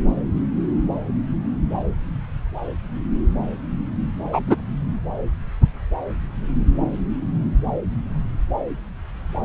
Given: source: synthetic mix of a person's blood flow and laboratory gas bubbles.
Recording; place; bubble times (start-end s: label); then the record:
Doppler ultrasound of blood flow; subclavian vein
4.32-4.40 s: bubbles
4.46-4.56 s: bubbles
From the record:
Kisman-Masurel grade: 123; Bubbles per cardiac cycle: 1 to 2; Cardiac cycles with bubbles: 10 to 50%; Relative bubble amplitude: loud (0.450 to 0.775); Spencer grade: 2 (many but less than half of the cardiac periods contain bubble signals, singularly or in groups); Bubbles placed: anywhere in the cardiac cycle